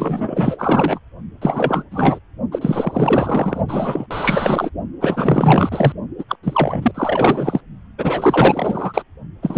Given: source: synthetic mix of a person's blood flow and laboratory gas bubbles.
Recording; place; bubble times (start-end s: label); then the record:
Doppler ultrasound of blood flow; precordium
0.00-0.99 s: bubbles
1.42-1.84 s: bubbles
1.91-2.19 s: bubbles
2.51-3.60 s: bubbles
3.68-4.06 s: bubbles
4.10-4.70 s: bubbles
5.00-5.92 s: bubbles
6.17-6.24 s: bubbles
6.28-6.35 s: bubbles
6.43-6.92 s: bubbles
6.94-7.60 s: bubbles
7.98-9.03 s: bubbles
9.43-9.58 s: bubbles
From the record:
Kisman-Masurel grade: 444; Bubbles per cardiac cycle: continuous sound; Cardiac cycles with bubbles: 100%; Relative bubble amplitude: maximal (0.775 to 0.999); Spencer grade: 4 (maximum detectable bubble signal sounding continuously throughout systole and diastole of every cardiac period, and overriding the amplitude of the normal cardiac signals); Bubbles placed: only in the low amplitude regions of the cardiac cycle